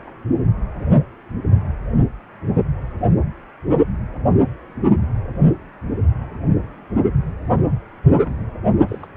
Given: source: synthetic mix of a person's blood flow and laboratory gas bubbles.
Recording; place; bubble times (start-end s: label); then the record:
Doppler ultrasound of blood flow; precordium
0.07-0.10 s: bubbles
8.24-8.34 s: bubbles
8.88-9.07 s: bubbles
From the record:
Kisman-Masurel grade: 121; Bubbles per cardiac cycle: 1 to 2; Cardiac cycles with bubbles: 10 to 50%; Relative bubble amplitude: barely perceptible (0.100 to 0.250); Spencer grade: 2 (many but less than half of the cardiac periods contain bubble signals, singularly or in groups); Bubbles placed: only in the low amplitude regions of the cardiac cycle